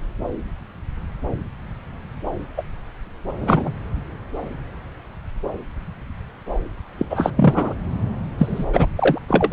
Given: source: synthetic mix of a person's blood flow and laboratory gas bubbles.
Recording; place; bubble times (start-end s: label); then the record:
Doppler ultrasound of blood flow; subclavian vein
2.57-2.62 s: bubbles
3.41-3.72 s: bubbles
6.97-7.06 s: bubbles
7.10-7.31 s: bubbles
7.36-7.73 s: bubbles
8.38-8.65 s: bubbles
8.73-8.87 s: bubbles
8.96-9.19 s: bubbles
9.28-9.53 s: bubbles
From the record:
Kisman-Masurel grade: 223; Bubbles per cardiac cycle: several, 3 to 8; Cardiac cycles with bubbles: 10 to 50%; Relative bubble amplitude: loud (0.450 to 0.775); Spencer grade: 2 (many but less than half of the cardiac periods contain bubble signals, singularly or in groups); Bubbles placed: anywhere in the cardiac cycle